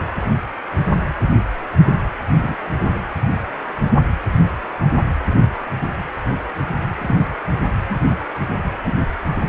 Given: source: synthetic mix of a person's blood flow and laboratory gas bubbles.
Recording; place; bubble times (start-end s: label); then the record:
Doppler ultrasound of blood flow; precordium
2.43-2.54 s: bubbles
6.98-7.15 s: bubbles
7.89-7.97 s: bubbles
8.86-8.94 s: bubbles
From the record:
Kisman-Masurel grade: 123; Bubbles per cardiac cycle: 1 to 2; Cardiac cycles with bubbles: 10 to 50%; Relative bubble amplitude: loud (0.450 to 0.775); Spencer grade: 2 (many but less than half of the cardiac periods contain bubble signals, singularly or in groups); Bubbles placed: anywhere in the cardiac cycle